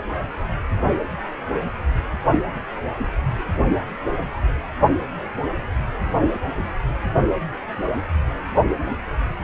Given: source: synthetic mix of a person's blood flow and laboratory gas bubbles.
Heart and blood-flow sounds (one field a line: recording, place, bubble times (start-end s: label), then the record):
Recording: Doppler ultrasound of blood flow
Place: precordium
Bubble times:
6.63-6.67 s: bubbles
From the record:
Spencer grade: 1 (occasional bubble signal discernible with the cardiac motion signal, with majority of cardiac periods free of bubbles)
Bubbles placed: only in the low amplitude regions of the cardiac cycle